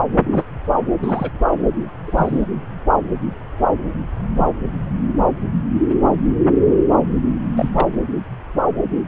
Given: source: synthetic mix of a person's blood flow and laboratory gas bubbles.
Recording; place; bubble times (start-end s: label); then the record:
Doppler ultrasound of blood flow; subclavian vein
0.32-0.44 s: bubbles
1.03-1.31 s: bubbles
2.07-2.46 s: bubbles
7.56-7.70 s: bubbles
7.73-7.88 s: bubbles
From the record:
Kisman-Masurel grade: 122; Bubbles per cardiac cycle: 1 to 2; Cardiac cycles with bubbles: 10 to 50%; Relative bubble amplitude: moderate (0.250 to 0.450); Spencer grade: 2 (many but less than half of the cardiac periods contain bubble signals, singularly or in groups); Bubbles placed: anywhere in the cardiac cycle